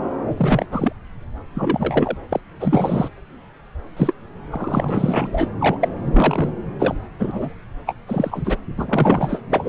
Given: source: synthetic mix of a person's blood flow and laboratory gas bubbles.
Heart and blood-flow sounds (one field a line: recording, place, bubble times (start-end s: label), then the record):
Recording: Doppler ultrasound of blood flow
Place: subclavian vein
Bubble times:
0.33-0.66 s: bubbles
0.71-0.93 s: bubbles
1.54-2.17 s: bubbles
2.29-2.40 s: bubbles
2.60-3.08 s: bubbles
3.96-4.14 s: bubbles
4.50-5.27 s: bubbles
5.32-5.49 s: bubbles
5.60-5.78 s: bubbles
5.80-5.88 s: bubbles
6.04-6.50 s: bubbles
6.79-6.94 s: bubbles
7.20-7.54 s: bubbles
7.86-7.94 s: bubbles
8.07-8.57 s: bubbles
8.77-9.41 s: bubbles
9.50-9.69 s: bubbles
From the record:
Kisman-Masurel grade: 243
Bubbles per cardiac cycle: several, 3 to 8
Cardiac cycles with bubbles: 100%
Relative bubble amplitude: loud (0.450 to 0.775)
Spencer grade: 3 (all of the cardiac periods contain showers or single bubble signals, but not dominating or overriding the cardiac motion signals)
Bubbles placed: anywhere in the cardiac cycle